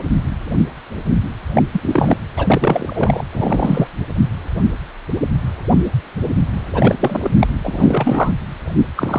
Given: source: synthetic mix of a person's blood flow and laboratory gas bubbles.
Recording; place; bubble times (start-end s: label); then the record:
Doppler ultrasound of blood flow; precordium
1.55-1.63 s: bubbles
1.71-2.17 s: bubbles
2.37-3.24 s: bubbles
3.33-3.88 s: bubbles
6.74-6.95 s: bubbles
7.00-7.30 s: bubbles
7.41-7.47 s: bubbles
7.63-8.32 s: bubbles
8.96-9.19 s: bubbles
From the record:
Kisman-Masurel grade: 233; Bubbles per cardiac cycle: several, 3 to 8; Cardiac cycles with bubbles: 50 to 99%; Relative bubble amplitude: loud (0.450 to 0.775); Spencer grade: 3 (all of the cardiac periods contain showers or single bubble signals, but not dominating or overriding the cardiac motion signals); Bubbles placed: anywhere in the cardiac cycle